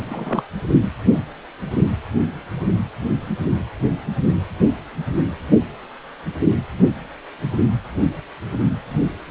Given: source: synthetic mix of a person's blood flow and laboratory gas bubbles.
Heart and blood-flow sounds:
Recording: Doppler ultrasound of blood flow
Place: precordium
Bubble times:
0.09-0.43 s: bubbles
From the record:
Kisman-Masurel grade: 212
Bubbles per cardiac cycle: several, 3 to 8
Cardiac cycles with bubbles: 1 to 10%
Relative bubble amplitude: moderate (0.250 to 0.450)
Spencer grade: 1 (occasional bubble signal discernible with the cardiac motion signal, with majority of cardiac periods free of bubbles)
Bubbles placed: anywhere in the cardiac cycle

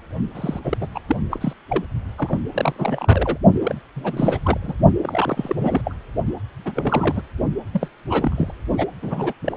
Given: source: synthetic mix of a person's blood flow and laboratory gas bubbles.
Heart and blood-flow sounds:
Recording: Doppler ultrasound of blood flow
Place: precordium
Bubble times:
0.34-0.60 s: bubbles
0.64-0.78 s: bubbles
0.80-0.87 s: bubbles
0.94-1.00 s: bubbles
1.06-1.17 s: bubbles
1.31-1.54 s: bubbles
1.68-1.85 s: bubbles
2.17-2.38 s: bubbles
2.52-3.38 s: bubbles
3.61-3.75 s: bubbles
3.95-4.38 s: bubbles
4.43-4.58 s: bubbles
4.62-4.74 s: bubbles
5.03-5.55 s: bubbles
5.61-5.82 s: bubbles
5.85-5.95 s: bubbles
6.27-6.32 s: bubbles
6.65-7.22 s: bubbles
7.73-7.88 s: bubbles
8.09-8.52 s: bubbles
8.77-8.87 s: bubbles
9.02-9.33 s: bubbles
9.45-9.57 s: bubbles
From the record:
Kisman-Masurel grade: 342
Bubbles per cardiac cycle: rolling drumbeat, 9 or more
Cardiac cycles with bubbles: 100%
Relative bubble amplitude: moderate (0.250 to 0.450)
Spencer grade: 3 (all of the cardiac periods contain showers or single bubble signals, but not dominating or overriding the cardiac motion signals)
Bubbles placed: only in the low amplitude regions of the cardiac cycle

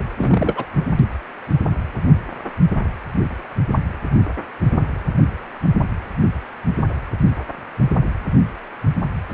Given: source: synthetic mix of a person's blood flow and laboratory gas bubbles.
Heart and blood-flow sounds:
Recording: Doppler ultrasound of blood flow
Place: precordium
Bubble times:
0.17-0.67 s: bubbles
From the record:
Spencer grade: 2 (many but less than half of the cardiac periods contain bubble signals, singularly or in groups)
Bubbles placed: only in the low amplitude regions of the cardiac cycle

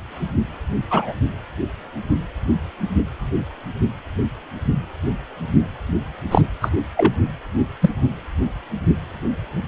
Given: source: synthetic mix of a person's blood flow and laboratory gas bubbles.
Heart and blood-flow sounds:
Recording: Doppler ultrasound of blood flow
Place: precordium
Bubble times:
0.89-1.13 s: bubbles
6.30-6.42 s: bubbles
6.61-6.69 s: bubbles
6.96-7.13 s: bubbles
7.81-7.90 s: bubbles
From the record:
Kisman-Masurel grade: 123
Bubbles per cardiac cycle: 1 to 2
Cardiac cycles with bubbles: 10 to 50%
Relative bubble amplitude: loud (0.450 to 0.775)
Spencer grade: 2 (many but less than half of the cardiac periods contain bubble signals, singularly or in groups)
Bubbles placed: anywhere in the cardiac cycle

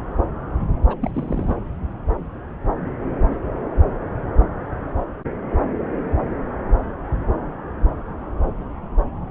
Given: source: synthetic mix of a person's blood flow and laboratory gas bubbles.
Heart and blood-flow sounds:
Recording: Doppler ultrasound of blood flow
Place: subclavian vein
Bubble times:
0.88-0.95 s: bubbles
1.02-1.10 s: bubbles
1.14-1.56 s: bubbles
From the record:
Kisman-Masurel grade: 211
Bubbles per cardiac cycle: several, 3 to 8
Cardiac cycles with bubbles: 1 to 10%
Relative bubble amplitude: barely perceptible (0.100 to 0.250)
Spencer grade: 1 (occasional bubble signal discernible with the cardiac motion signal, with majority of cardiac periods free of bubbles)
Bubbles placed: anywhere in the cardiac cycle

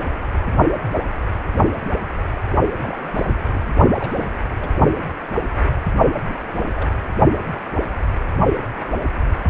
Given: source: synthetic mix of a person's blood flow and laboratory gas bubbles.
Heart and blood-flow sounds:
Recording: Doppler ultrasound of blood flow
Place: precordium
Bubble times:
2.77-2.97 s: bubbles
3.04-3.11 s: bubbles
3.15-3.75 s: bubbles
3.93-4.26 s: bubbles
4.60-4.70 s: bubbles
6.28-6.43 s: bubbles
6.54-6.92 s: bubbles
From the record:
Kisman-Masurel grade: 221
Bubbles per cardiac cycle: several, 3 to 8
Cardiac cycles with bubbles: 10 to 50%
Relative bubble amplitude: barely perceptible (0.100 to 0.250)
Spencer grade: 2 (many but less than half of the cardiac periods contain bubble signals, singularly or in groups)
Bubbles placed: only in the low amplitude regions of the cardiac cycle

